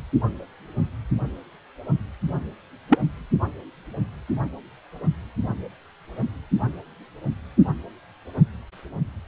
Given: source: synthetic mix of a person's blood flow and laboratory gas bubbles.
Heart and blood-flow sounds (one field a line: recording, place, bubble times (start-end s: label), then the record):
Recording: Doppler ultrasound of blood flow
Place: precordium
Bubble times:
2.90-2.98 s: bubbles
From the record:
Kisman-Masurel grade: 113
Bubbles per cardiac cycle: 1 to 2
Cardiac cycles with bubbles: 1 to 10%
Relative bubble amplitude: loud (0.450 to 0.775)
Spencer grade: 1 (occasional bubble signal discernible with the cardiac motion signal, with majority of cardiac periods free of bubbles)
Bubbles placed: only in the low amplitude regions of the cardiac cycle